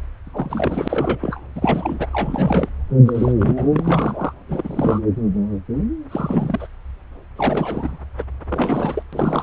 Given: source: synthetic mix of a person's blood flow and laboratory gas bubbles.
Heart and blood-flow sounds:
Doppler ultrasound of blood flow; subclavian vein
0.26-1.40 s: bubbles
1.55-2.07 s: bubbles
2.12-2.69 s: bubbles
3.06-3.32 s: bubbles
3.38-4.33 s: bubbles
4.49-5.00 s: bubbles
6.08-6.67 s: bubbles
7.36-7.97 s: bubbles
8.17-8.24 s: bubbles
8.48-9.03 s: bubbles
9.12-9.43 s: bubbles
From the record:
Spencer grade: 3 (all of the cardiac periods contain showers or single bubble signals, but not dominating or overriding the cardiac motion signals); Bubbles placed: anywhere in the cardiac cycle

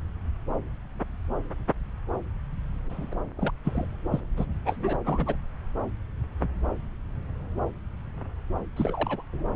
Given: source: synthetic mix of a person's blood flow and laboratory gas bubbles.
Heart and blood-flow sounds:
Doppler ultrasound of blood flow; subclavian vein
2.89-3.15 s: bubbles
3.37-3.51 s: bubbles
3.65-3.86 s: bubbles
4.11-4.21 s: bubbles
4.37-4.45 s: bubbles
4.66-4.98 s: bubbles
5.04-5.35 s: bubbles
8.76-9.23 s: bubbles
9.33-9.44 s: bubbles
From the record:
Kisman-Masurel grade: 221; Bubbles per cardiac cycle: several, 3 to 8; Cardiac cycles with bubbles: 10 to 50%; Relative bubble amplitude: barely perceptible (0.100 to 0.250); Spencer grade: 2 (many but less than half of the cardiac periods contain bubble signals, singularly or in groups); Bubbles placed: anywhere in the cardiac cycle

